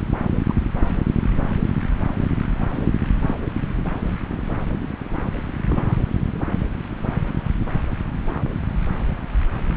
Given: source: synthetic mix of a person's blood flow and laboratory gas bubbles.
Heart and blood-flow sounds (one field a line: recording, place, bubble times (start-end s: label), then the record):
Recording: Doppler ultrasound of blood flow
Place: subclavian vein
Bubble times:
0.47-0.53 s: bubbles
2.74-2.91 s: bubbles
3.27-3.36 s: bubbles
5.66-5.99 s: bubbles
From the record:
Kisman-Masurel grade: 121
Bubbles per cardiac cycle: 1 to 2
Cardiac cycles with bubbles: 10 to 50%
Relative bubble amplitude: barely perceptible (0.100 to 0.250)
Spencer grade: 2 (many but less than half of the cardiac periods contain bubble signals, singularly or in groups)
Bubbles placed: anywhere in the cardiac cycle